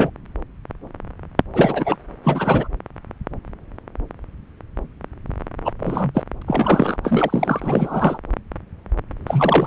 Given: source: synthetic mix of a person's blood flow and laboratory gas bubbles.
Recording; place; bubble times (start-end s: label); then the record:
Doppler ultrasound of blood flow; subclavian vein
0.00-0.10 s: bubbles
1.54-1.97 s: bubbles
2.23-2.68 s: bubbles
5.65-5.72 s: bubbles
5.79-6.12 s: bubbles
6.14-6.22 s: bubbles
6.47-6.97 s: bubbles
7.04-8.18 s: bubbles
9.26-9.67 s: bubbles
From the record:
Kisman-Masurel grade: 333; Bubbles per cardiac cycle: rolling drumbeat, 9 or more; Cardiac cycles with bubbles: 50 to 99%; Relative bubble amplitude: loud (0.450 to 0.775); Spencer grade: 3 (all of the cardiac periods contain showers or single bubble signals, but not dominating or overriding the cardiac motion signals); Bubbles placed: anywhere in the cardiac cycle